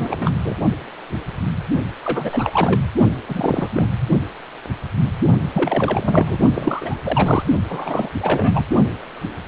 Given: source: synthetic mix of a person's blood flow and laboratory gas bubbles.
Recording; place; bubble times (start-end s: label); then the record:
Doppler ultrasound of blood flow; precordium
0.00-0.34 s: bubbles
0.42-0.56 s: bubbles
2.02-2.50 s: bubbles
2.53-2.81 s: bubbles
3.28-3.67 s: bubbles
3.70-3.90 s: bubbles
5.53-6.38 s: bubbles
6.55-6.99 s: bubbles
7.04-7.42 s: bubbles
7.68-8.10 s: bubbles
8.20-8.64 s: bubbles
From the record:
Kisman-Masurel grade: 332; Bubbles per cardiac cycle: rolling drumbeat, 9 or more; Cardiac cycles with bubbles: 50 to 99%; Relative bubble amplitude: moderate (0.250 to 0.450); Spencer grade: 3 (all of the cardiac periods contain showers or single bubble signals, but not dominating or overriding the cardiac motion signals); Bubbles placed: only in the low amplitude regions of the cardiac cycle